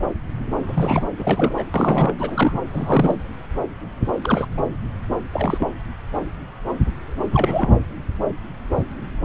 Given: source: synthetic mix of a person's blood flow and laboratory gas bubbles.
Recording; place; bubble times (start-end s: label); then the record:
Doppler ultrasound of blood flow; subclavian vein
0.67-1.05 s: bubbles
1.17-1.54 s: bubbles
1.56-1.64 s: bubbles
1.74-2.15 s: bubbles
2.18-2.58 s: bubbles
2.72-3.16 s: bubbles
4.22-4.46 s: bubbles
4.57-4.61 s: bubbles
5.32-5.68 s: bubbles
7.32-7.73 s: bubbles
From the record:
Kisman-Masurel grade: 222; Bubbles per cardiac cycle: several, 3 to 8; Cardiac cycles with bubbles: 10 to 50%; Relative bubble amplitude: moderate (0.250 to 0.450); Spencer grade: 2 (many but less than half of the cardiac periods contain bubble signals, singularly or in groups); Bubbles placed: anywhere in the cardiac cycle